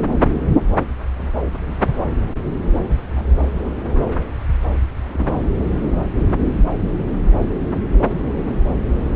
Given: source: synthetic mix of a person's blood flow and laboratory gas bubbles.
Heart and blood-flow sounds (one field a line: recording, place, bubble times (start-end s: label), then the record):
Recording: Doppler ultrasound of blood flow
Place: subclavian vein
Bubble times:
2.21-2.33 s: bubbles
3.17-3.23 s: bubbles
3.63-3.72 s: bubbles
5.06-5.32 s: bubbles
From the record:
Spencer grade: 2 (many but less than half of the cardiac periods contain bubble signals, singularly or in groups)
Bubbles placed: anywhere in the cardiac cycle